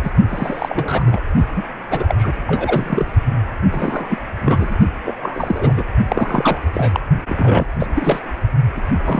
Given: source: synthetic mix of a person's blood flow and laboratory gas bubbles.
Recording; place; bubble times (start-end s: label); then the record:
Doppler ultrasound of blood flow; precordium
0.02-0.11 s: bubbles
0.30-1.04 s: bubbles
1.06-1.20 s: bubbles
1.56-1.63 s: bubbles
1.90-2.15 s: bubbles
2.19-2.33 s: bubbles
2.47-3.05 s: bubbles
3.72-4.25 s: bubbles
4.39-4.77 s: bubbles
5.04-5.15 s: bubbles
5.22-5.73 s: bubbles
5.75-5.83 s: bubbles
6.08-6.58 s: bubbles
6.73-7.00 s: bubbles
7.27-7.67 s: bubbles
7.79-7.87 s: bubbles
7.96-8.19 s: bubbles
8.76-8.81 s: bubbles
9.05-9.19 s: bubbles
From the record:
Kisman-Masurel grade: 342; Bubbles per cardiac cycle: rolling drumbeat, 9 or more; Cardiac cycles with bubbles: 100%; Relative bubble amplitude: moderate (0.250 to 0.450); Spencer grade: 3 (all of the cardiac periods contain showers or single bubble signals, but not dominating or overriding the cardiac motion signals); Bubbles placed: only in the low amplitude regions of the cardiac cycle